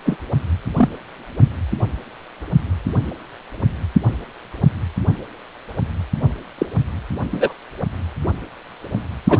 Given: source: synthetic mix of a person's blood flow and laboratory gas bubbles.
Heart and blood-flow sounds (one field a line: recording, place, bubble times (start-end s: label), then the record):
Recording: Doppler ultrasound of blood flow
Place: precordium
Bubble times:
0.05-0.18 s: bubbles
0.75-0.88 s: bubbles
6.58-6.66 s: bubbles
7.30-7.53 s: bubbles
9.28-9.39 s: bubbles
From the record:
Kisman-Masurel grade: 123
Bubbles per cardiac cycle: 1 to 2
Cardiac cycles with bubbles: 10 to 50%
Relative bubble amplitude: loud (0.450 to 0.775)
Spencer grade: 2 (many but less than half of the cardiac periods contain bubble signals, singularly or in groups)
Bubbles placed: only in the low amplitude regions of the cardiac cycle